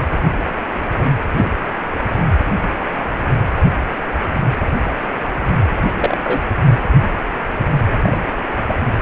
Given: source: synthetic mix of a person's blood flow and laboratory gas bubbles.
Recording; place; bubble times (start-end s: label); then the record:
Doppler ultrasound of blood flow; precordium
1.38-1.54 s: bubbles
5.97-6.17 s: bubbles
6.24-6.42 s: bubbles
8.03-8.18 s: bubbles
8.67-8.74 s: bubbles
From the record:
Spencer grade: 2 (many but less than half of the cardiac periods contain bubble signals, singularly or in groups); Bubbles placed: anywhere in the cardiac cycle